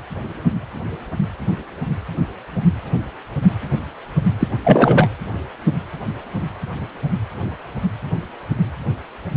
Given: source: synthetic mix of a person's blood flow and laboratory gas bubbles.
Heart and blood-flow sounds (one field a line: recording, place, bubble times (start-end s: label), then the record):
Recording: Doppler ultrasound of blood flow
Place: precordium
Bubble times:
4.39-4.48 s: bubbles
4.64-5.09 s: bubbles
From the record:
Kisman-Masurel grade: 213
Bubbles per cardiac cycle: several, 3 to 8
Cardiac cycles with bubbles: 1 to 10%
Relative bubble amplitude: loud (0.450 to 0.775)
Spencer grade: 1 (occasional bubble signal discernible with the cardiac motion signal, with majority of cardiac periods free of bubbles)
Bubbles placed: anywhere in the cardiac cycle